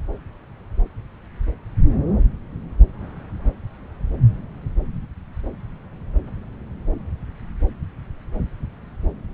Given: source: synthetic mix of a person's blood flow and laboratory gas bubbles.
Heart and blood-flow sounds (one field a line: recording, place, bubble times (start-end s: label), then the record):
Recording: Doppler ultrasound of blood flow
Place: subclavian vein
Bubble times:
no bubbles
From the record:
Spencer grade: 0 (complete lack of bubble signals)